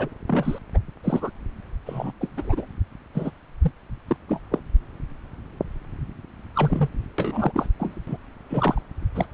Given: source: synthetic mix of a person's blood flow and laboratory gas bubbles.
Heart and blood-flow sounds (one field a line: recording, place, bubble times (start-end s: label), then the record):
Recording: Doppler ultrasound of blood flow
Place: subclavian vein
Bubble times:
0.00-0.09 s: bubbles
0.27-0.58 s: bubbles
0.73-0.79 s: bubbles
1.03-1.30 s: bubbles
1.86-2.12 s: bubbles
2.21-2.31 s: bubbles
2.37-2.66 s: bubbles
3.14-3.31 s: bubbles
3.61-3.71 s: bubbles
4.07-4.17 s: bubbles
4.28-4.40 s: bubbles
4.51-4.59 s: bubbles
6.55-6.89 s: bubbles
7.18-7.67 s: bubbles
7.80-7.96 s: bubbles
8.07-8.16 s: bubbles
8.49-8.81 s: bubbles
9.14-9.26 s: bubbles
From the record:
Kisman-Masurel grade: 242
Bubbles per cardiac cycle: several, 3 to 8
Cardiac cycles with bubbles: 100%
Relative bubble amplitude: moderate (0.250 to 0.450)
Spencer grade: 3 (all of the cardiac periods contain showers or single bubble signals, but not dominating or overriding the cardiac motion signals)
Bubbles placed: anywhere in the cardiac cycle